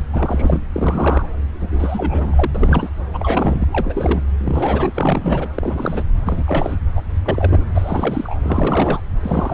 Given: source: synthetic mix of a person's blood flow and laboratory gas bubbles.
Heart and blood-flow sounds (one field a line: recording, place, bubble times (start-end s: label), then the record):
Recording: Doppler ultrasound of blood flow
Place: subclavian vein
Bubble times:
0.00-0.02 s: bubbles
0.13-0.62 s: bubbles
0.72-1.27 s: bubbles
1.60-2.50 s: bubbles
2.54-2.90 s: bubbles
3.13-3.67 s: bubbles
3.71-4.23 s: bubbles
4.40-4.91 s: bubbles
4.95-5.49 s: bubbles
5.56-6.03 s: bubbles
6.25-6.76 s: bubbles
6.96-7.02 s: bubbles
7.25-7.64 s: bubbles
7.75-8.39 s: bubbles
8.42-9.02 s: bubbles
9.22-9.54 s: bubbles
From the record:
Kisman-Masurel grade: 342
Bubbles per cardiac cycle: rolling drumbeat, 9 or more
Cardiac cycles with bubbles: 100%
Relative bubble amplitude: moderate (0.250 to 0.450)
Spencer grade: 3 (all of the cardiac periods contain showers or single bubble signals, but not dominating or overriding the cardiac motion signals)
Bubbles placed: anywhere in the cardiac cycle